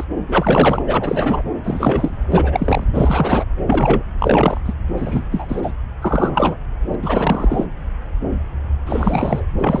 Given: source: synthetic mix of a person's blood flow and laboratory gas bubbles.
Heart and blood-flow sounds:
Doppler ultrasound of blood flow; subclavian vein
0.00-0.04 s: bubbles
0.28-0.82 s: bubbles
0.86-1.42 s: bubbles
1.64-2.25 s: bubbles
2.31-2.83 s: bubbles
2.94-3.45 s: bubbles
3.67-4.03 s: bubbles
4.19-4.61 s: bubbles
4.64-4.73 s: bubbles
4.96-5.23 s: bubbles
5.32-5.73 s: bubbles
6.00-6.58 s: bubbles
6.90-6.96 s: bubbles
7.02-7.65 s: bubbles
8.86-9.46 s: bubbles
9.58-9.80 s: bubbles
From the record:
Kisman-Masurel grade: 333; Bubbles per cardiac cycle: rolling drumbeat, 9 or more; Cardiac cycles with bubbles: 50 to 99%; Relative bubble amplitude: loud (0.450 to 0.775); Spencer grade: 3 (all of the cardiac periods contain showers or single bubble signals, but not dominating or overriding the cardiac motion signals); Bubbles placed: anywhere in the cardiac cycle

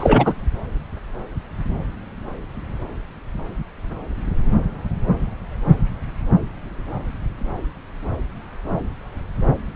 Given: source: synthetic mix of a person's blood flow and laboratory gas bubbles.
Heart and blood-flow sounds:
Doppler ultrasound of blood flow; subclavian vein
0.00-0.35 s: bubbles
From the record:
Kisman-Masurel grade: 213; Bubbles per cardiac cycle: several, 3 to 8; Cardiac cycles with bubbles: 1 to 10%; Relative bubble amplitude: loud (0.450 to 0.775); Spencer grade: 1 (occasional bubble signal discernible with the cardiac motion signal, with majority of cardiac periods free of bubbles); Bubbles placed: anywhere in the cardiac cycle

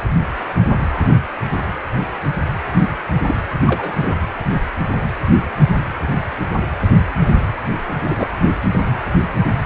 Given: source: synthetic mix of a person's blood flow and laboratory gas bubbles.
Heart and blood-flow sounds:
Doppler ultrasound of blood flow; precordium
3.27-3.35 s: bubbles
3.66-4.15 s: bubbles
8.01-8.27 s: bubbles
From the record:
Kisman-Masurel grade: 122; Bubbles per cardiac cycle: 1 to 2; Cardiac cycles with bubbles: 10 to 50%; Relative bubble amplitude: moderate (0.250 to 0.450); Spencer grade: 2 (many but less than half of the cardiac periods contain bubble signals, singularly or in groups); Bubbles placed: anywhere in the cardiac cycle

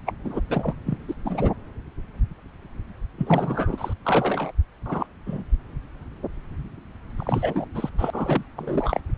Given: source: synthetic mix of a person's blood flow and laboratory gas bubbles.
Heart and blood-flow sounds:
Doppler ultrasound of blood flow; subclavian vein
0.05-0.13 s: bubbles
0.24-0.41 s: bubbles
0.49-0.74 s: bubbles
0.85-0.98 s: bubbles
1.08-1.15 s: bubbles
1.24-1.51 s: bubbles
3.17-3.93 s: bubbles
4.04-4.51 s: bubbles
4.86-5.07 s: bubbles
5.26-5.43 s: bubbles
7.17-7.66 s: bubbles
7.75-7.90 s: bubbles
7.98-8.43 s: bubbles
8.56-9.00 s: bubbles
From the record:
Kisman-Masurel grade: 233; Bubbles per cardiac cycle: several, 3 to 8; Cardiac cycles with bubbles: 50 to 99%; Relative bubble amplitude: loud (0.450 to 0.775); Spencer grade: 3 (all of the cardiac periods contain showers or single bubble signals, but not dominating or overriding the cardiac motion signals); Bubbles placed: anywhere in the cardiac cycle

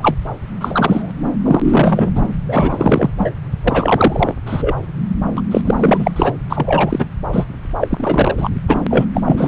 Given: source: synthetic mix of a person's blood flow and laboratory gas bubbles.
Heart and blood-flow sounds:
Doppler ultrasound of blood flow; subclavian vein
0.00-0.16 s: bubbles
0.60-1.11 s: bubbles
1.44-1.61 s: bubbles
1.64-2.12 s: bubbles
2.15-2.31 s: bubbles
2.48-3.10 s: bubbles
3.18-3.31 s: bubbles
3.64-4.35 s: bubbles
4.46-4.75 s: bubbles
5.37-5.41 s: bubbles
5.51-5.61 s: bubbles
5.65-6.34 s: bubbles
6.49-7.06 s: bubbles
7.33-7.46 s: bubbles
7.81-7.88 s: bubbles
7.91-8.50 s: bubbles
8.67-8.80 s: bubbles
8.90-9.05 s: bubbles
9.13-9.22 s: bubbles
9.24-9.48 s: bubbles
From the record:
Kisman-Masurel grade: 343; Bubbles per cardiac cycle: rolling drumbeat, 9 or more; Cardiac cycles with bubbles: 100%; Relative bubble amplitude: loud (0.450 to 0.775); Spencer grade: 3 (all of the cardiac periods contain showers or single bubble signals, but not dominating or overriding the cardiac motion signals); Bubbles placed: anywhere in the cardiac cycle

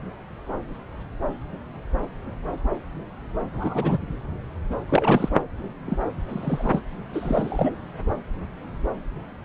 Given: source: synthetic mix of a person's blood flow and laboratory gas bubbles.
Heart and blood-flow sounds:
Doppler ultrasound of blood flow; subclavian vein
3.53-3.98 s: bubbles
4.89-5.29 s: bubbles
5.87-5.97 s: bubbles
6.29-6.80 s: bubbles
7.13-7.75 s: bubbles
From the record:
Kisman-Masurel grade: 223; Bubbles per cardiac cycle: several, 3 to 8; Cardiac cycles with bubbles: 10 to 50%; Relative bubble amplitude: loud (0.450 to 0.775); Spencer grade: 2 (many but less than half of the cardiac periods contain bubble signals, singularly or in groups); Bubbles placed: anywhere in the cardiac cycle

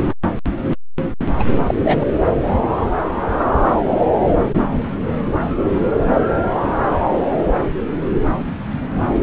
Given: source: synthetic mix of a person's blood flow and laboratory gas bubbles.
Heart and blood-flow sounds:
Doppler ultrasound of blood flow; subclavian vein
1.40-1.44 s: bubbles
1.67-1.75 s: bubbles
1.84-2.04 s: bubbles
From the record:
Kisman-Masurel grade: 213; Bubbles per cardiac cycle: several, 3 to 8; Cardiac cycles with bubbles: 1 to 10%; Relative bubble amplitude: loud (0.450 to 0.775); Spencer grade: 1 (occasional bubble signal discernible with the cardiac motion signal, with majority of cardiac periods free of bubbles); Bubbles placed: anywhere in the cardiac cycle

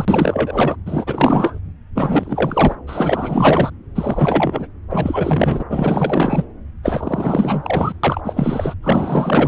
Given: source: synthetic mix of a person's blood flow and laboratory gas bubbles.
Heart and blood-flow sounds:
Doppler ultrasound of blood flow; subclavian vein
0.00-0.76 s: bubbles
0.85-1.59 s: bubbles
1.95-2.75 s: bubbles
2.87-3.70 s: bubbles
3.95-4.67 s: bubbles
4.91-5.64 s: bubbles
5.69-6.45 s: bubbles
6.83-7.93 s: bubbles
8.03-8.21 s: bubbles
8.24-8.74 s: bubbles
8.82-9.48 s: bubbles
From the record:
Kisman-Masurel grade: 444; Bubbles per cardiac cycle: continuous sound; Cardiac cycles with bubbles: 100%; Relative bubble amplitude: maximal (0.775 to 0.999); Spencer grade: 4 (maximum detectable bubble signal sounding continuously throughout systole and diastole of every cardiac period, and overriding the amplitude of the normal cardiac signals); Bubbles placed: anywhere in the cardiac cycle

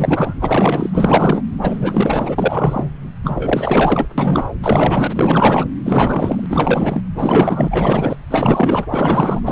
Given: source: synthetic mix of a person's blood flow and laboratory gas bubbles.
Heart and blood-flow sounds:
Doppler ultrasound of blood flow; subclavian vein
0.00-0.35 s: bubbles
0.39-1.43 s: bubbles
1.61-2.89 s: bubbles
3.23-4.06 s: bubbles
4.17-4.46 s: bubbles
4.62-5.66 s: bubbles
5.85-6.46 s: bubbles
6.49-7.01 s: bubbles
7.14-8.17 s: bubbles
8.30-8.86 s: bubbles
8.92-9.41 s: bubbles
9.46-9.52 s: bubbles
From the record:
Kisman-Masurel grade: 444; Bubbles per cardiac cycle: continuous sound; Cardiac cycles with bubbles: 100%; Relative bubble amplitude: maximal (0.775 to 0.999); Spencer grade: 4 (maximum detectable bubble signal sounding continuously throughout systole and diastole of every cardiac period, and overriding the amplitude of the normal cardiac signals); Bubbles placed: anywhere in the cardiac cycle

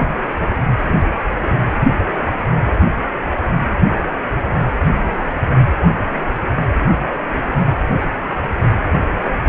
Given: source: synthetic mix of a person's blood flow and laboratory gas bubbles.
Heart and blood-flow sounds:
Doppler ultrasound of blood flow; precordium
4.80-4.85 s: bubbles
From the record:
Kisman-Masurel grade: 112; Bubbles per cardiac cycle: 1 to 2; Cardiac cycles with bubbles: 1 to 10%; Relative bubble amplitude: moderate (0.250 to 0.450); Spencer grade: 1 (occasional bubble signal discernible with the cardiac motion signal, with majority of cardiac periods free of bubbles); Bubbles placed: anywhere in the cardiac cycle

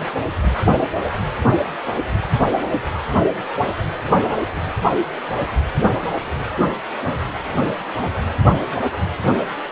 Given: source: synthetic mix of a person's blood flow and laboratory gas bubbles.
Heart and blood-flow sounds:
Doppler ultrasound of blood flow; precordium
no bubbles
From the record:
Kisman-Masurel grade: 000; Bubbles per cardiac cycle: 0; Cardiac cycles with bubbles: 0%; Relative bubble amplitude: no bubbles discernible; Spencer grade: 0 (complete lack of bubble signals)

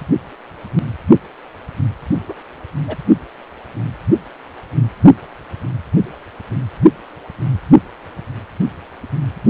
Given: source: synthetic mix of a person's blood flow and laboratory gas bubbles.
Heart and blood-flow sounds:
Doppler ultrasound of blood flow; precordium
2.28-2.33 s: bubbles
2.87-2.96 s: bubbles
From the record:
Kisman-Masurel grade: 122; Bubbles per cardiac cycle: 1 to 2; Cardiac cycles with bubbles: 10 to 50%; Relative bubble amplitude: moderate (0.250 to 0.450); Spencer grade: 2 (many but less than half of the cardiac periods contain bubble signals, singularly or in groups); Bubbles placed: only in the low amplitude regions of the cardiac cycle

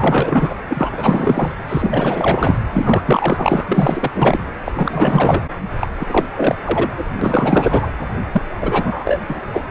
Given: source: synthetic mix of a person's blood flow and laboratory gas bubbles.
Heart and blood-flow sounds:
Doppler ultrasound of blood flow; precordium
0.00-0.55 s: bubbles
0.69-1.52 s: bubbles
1.69-2.58 s: bubbles
2.73-3.01 s: bubbles
3.05-3.65 s: bubbles
3.67-4.11 s: bubbles
4.14-4.45 s: bubbles
4.65-4.72 s: bubbles
4.75-5.42 s: bubbles
5.79-5.89 s: bubbles
6.00-6.28 s: bubbles
6.37-6.55 s: bubbles
6.64-6.91 s: bubbles
6.96-7.06 s: bubbles
7.21-7.92 s: bubbles
8.32-8.43 s: bubbles
8.62-9.21 s: bubbles
9.27-9.41 s: bubbles
9.54-9.62 s: bubbles
From the record:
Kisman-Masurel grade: 444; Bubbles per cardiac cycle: continuous sound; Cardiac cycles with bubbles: 100%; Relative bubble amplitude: maximal (0.775 to 0.999); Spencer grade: 4 (maximum detectable bubble signal sounding continuously throughout systole and diastole of every cardiac period, and overriding the amplitude of the normal cardiac signals); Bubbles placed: anywhere in the cardiac cycle

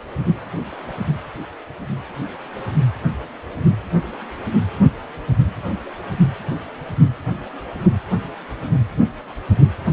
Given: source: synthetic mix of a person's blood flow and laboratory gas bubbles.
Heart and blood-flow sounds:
Doppler ultrasound of blood flow; precordium
no bubbles
From the record:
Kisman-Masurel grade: 000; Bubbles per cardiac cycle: 0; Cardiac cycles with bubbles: 0%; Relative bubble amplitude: no bubbles discernible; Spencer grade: 0 (complete lack of bubble signals)

